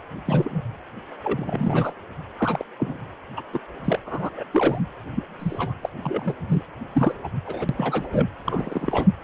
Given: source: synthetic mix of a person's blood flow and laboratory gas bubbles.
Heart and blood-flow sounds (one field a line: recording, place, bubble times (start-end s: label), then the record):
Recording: Doppler ultrasound of blood flow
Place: precordium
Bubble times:
0.25-0.61 s: bubbles
1.24-1.92 s: bubbles
2.37-2.64 s: bubbles
2.78-2.97 s: bubbles
3.37-3.42 s: bubbles
3.52-3.59 s: bubbles
3.84-3.99 s: bubbles
4.06-4.30 s: bubbles
4.35-4.44 s: bubbles
4.51-4.81 s: bubbles
5.16-5.24 s: bubbles
5.40-5.74 s: bubbles
5.83-5.89 s: bubbles
6.02-6.34 s: bubbles
6.48-6.62 s: bubbles
6.93-7.13 s: bubbles
7.23-7.28 s: bubbles
7.46-7.65 s: bubbles
7.69-8.08 s: bubbles
8.12-8.28 s: bubbles
8.44-9.08 s: bubbles
From the record:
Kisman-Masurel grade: 242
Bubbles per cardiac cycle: several, 3 to 8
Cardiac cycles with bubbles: 100%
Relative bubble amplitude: moderate (0.250 to 0.450)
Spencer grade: 3 (all of the cardiac periods contain showers or single bubble signals, but not dominating or overriding the cardiac motion signals)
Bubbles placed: anywhere in the cardiac cycle